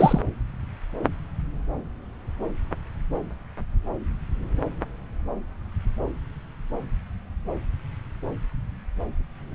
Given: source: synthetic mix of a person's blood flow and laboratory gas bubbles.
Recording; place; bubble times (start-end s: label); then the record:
Doppler ultrasound of blood flow; subclavian vein
0.00-0.21 s: bubbles
From the record:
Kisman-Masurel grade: 212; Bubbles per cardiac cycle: several, 3 to 8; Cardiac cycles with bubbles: 1 to 10%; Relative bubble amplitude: moderate (0.250 to 0.450); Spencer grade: 1 (occasional bubble signal discernible with the cardiac motion signal, with majority of cardiac periods free of bubbles); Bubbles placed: anywhere in the cardiac cycle